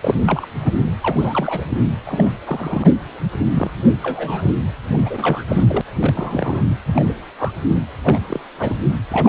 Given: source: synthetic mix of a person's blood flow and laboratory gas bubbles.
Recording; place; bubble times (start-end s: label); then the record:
Doppler ultrasound of blood flow; precordium
0.01-0.22 s: bubbles
0.26-0.46 s: bubbles
0.59-0.71 s: bubbles
1.01-1.79 s: bubbles
2.06-2.31 s: bubbles
2.46-2.90 s: bubbles
3.54-3.71 s: bubbles
4.03-4.52 s: bubbles
4.92-5.45 s: bubbles
5.48-5.63 s: bubbles
5.69-5.81 s: bubbles
6.01-6.63 s: bubbles
6.86-7.13 s: bubbles
7.38-7.52 s: bubbles
7.69-7.81 s: bubbles
8.03-8.21 s: bubbles
8.28-8.40 s: bubbles
8.59-8.80 s: bubbles
9.11-9.29 s: bubbles
From the record:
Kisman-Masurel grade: 242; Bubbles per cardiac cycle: several, 3 to 8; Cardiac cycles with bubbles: 100%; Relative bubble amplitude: moderate (0.250 to 0.450); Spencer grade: 3 (all of the cardiac periods contain showers or single bubble signals, but not dominating or overriding the cardiac motion signals); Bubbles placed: anywhere in the cardiac cycle